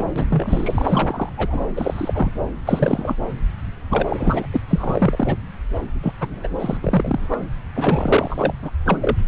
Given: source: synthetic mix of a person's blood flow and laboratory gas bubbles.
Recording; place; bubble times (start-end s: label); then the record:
Doppler ultrasound of blood flow; subclavian vein
0.00-0.08 s: bubbles
0.16-0.25 s: bubbles
0.29-1.30 s: bubbles
1.37-1.69 s: bubbles
1.76-2.31 s: bubbles
2.65-3.15 s: bubbles
3.90-4.47 s: bubbles
4.52-4.60 s: bubbles
4.67-5.37 s: bubbles
6.02-6.13 s: bubbles
6.21-6.27 s: bubbles
6.43-6.47 s: bubbles
6.59-6.77 s: bubbles
6.83-7.42 s: bubbles
7.75-8.53 s: bubbles
8.62-8.71 s: bubbles
8.85-8.98 s: bubbles
9.01-9.16 s: bubbles
From the record:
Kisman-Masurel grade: 342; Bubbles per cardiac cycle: rolling drumbeat, 9 or more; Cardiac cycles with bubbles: 100%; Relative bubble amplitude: moderate (0.250 to 0.450); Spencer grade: 3 (all of the cardiac periods contain showers or single bubble signals, but not dominating or overriding the cardiac motion signals); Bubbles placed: anywhere in the cardiac cycle